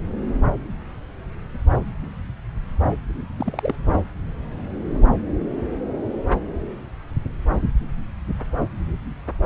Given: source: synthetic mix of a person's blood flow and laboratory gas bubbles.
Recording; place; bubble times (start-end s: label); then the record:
Doppler ultrasound of blood flow; subclavian vein
3.37-3.76 s: bubbles
3.85-3.97 s: bubbles
From the record:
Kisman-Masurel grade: 111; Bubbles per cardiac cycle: 1 to 2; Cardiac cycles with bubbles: 1 to 10%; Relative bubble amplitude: barely perceptible (0.100 to 0.250); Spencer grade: 1 (occasional bubble signal discernible with the cardiac motion signal, with majority of cardiac periods free of bubbles); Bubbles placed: anywhere in the cardiac cycle